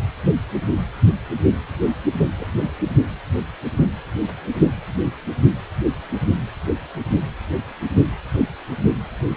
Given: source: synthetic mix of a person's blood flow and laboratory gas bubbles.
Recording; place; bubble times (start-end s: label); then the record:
Doppler ultrasound of blood flow; precordium
2.36-2.48 s: bubbles
2.66-2.91 s: bubbles
From the record:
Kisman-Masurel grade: 111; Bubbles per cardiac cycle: 1 to 2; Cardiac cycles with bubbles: 1 to 10%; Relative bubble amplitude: barely perceptible (0.100 to 0.250); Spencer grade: 1 (occasional bubble signal discernible with the cardiac motion signal, with majority of cardiac periods free of bubbles); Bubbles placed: only in the low amplitude regions of the cardiac cycle